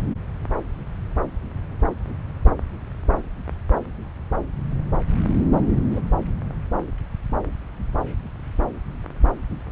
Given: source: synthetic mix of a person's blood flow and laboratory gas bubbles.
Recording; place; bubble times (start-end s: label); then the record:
Doppler ultrasound of blood flow; subclavian vein
5.90-6.00 s: bubbles
From the record:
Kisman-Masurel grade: 111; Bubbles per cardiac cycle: 1 to 2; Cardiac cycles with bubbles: 1 to 10%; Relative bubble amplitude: barely perceptible (0.100 to 0.250); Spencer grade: 1 (occasional bubble signal discernible with the cardiac motion signal, with majority of cardiac periods free of bubbles); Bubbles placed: anywhere in the cardiac cycle